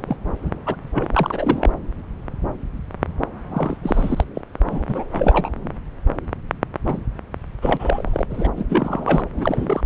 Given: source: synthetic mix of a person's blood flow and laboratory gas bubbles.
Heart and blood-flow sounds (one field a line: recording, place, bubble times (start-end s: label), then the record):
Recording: Doppler ultrasound of blood flow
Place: subclavian vein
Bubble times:
0.07-0.16 s: bubbles
0.45-0.52 s: bubbles
0.66-0.76 s: bubbles
0.94-1.07 s: bubbles
1.13-1.71 s: bubbles
3.50-3.77 s: bubbles
3.83-4.24 s: bubbles
4.34-4.42 s: bubbles
4.65-4.83 s: bubbles
4.88-5.04 s: bubbles
5.12-5.51 s: bubbles
6.86-7.01 s: bubbles
7.62-8.26 s: bubbles
8.30-8.49 s: bubbles
8.56-8.63 s: bubbles
8.70-9.22 s: bubbles
9.37-9.81 s: bubbles
From the record:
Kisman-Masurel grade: 232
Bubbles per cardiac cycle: several, 3 to 8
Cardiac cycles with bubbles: 50 to 99%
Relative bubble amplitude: moderate (0.250 to 0.450)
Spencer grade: 3 (all of the cardiac periods contain showers or single bubble signals, but not dominating or overriding the cardiac motion signals)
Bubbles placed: anywhere in the cardiac cycle